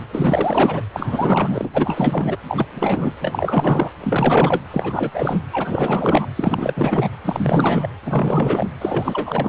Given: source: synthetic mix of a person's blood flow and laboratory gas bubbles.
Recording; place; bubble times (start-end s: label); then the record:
Doppler ultrasound of blood flow; precordium
0.00-0.05 s: bubbles
0.12-0.82 s: bubbles
0.93-1.70 s: bubbles
1.74-2.37 s: bubbles
2.48-2.67 s: bubbles
2.71-3.13 s: bubbles
3.20-3.90 s: bubbles
4.00-4.61 s: bubbles
4.71-5.40 s: bubbles
5.52-6.26 s: bubbles
6.35-7.08 s: bubbles
7.24-7.88 s: bubbles
8.03-8.70 s: bubbles
8.79-9.49 s: bubbles
From the record:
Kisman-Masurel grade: 444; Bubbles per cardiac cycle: continuous sound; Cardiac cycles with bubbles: 100%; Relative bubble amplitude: maximal (0.775 to 0.999); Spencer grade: 4 (maximum detectable bubble signal sounding continuously throughout systole and diastole of every cardiac period, and overriding the amplitude of the normal cardiac signals); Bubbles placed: anywhere in the cardiac cycle